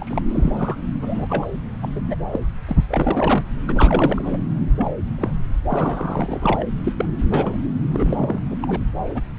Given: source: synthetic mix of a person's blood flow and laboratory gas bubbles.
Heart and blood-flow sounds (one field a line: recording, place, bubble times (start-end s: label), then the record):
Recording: Doppler ultrasound of blood flow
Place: subclavian vein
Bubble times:
0.00-0.22 s: bubbles
0.30-0.76 s: bubbles
1.01-1.27 s: bubbles
1.29-1.46 s: bubbles
1.82-1.88 s: bubbles
1.95-2.01 s: bubbles
2.08-2.15 s: bubbles
2.31-2.40 s: bubbles
2.67-2.77 s: bubbles
2.89-3.43 s: bubbles
3.67-4.42 s: bubbles
4.78-4.91 s: bubbles
5.18-5.30 s: bubbles
5.69-6.67 s: bubbles
6.84-6.93 s: bubbles
6.97-7.05 s: bubbles
7.30-7.58 s: bubbles
7.92-8.39 s: bubbles
8.51-8.56 s: bubbles
8.62-8.81 s: bubbles
9.05-9.25 s: bubbles
From the record:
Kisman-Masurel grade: 232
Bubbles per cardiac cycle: several, 3 to 8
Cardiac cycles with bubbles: 50 to 99%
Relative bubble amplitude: moderate (0.250 to 0.450)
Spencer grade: 3 (all of the cardiac periods contain showers or single bubble signals, but not dominating or overriding the cardiac motion signals)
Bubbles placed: anywhere in the cardiac cycle